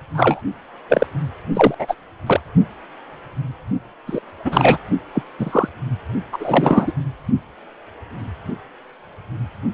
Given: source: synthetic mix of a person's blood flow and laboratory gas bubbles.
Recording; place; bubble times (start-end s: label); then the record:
Doppler ultrasound of blood flow; precordium
0.14-0.42 s: bubbles
0.88-1.06 s: bubbles
1.53-1.74 s: bubbles
1.78-1.95 s: bubbles
2.26-2.41 s: bubbles
4.06-4.21 s: bubbles
4.44-4.78 s: bubbles
5.14-5.22 s: bubbles
5.38-5.69 s: bubbles
6.32-6.92 s: bubbles
From the record:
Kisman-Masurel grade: 233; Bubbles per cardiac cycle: several, 3 to 8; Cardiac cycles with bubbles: 50 to 99%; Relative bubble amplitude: loud (0.450 to 0.775); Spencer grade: 3 (all of the cardiac periods contain showers or single bubble signals, but not dominating or overriding the cardiac motion signals); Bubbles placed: only in the low amplitude regions of the cardiac cycle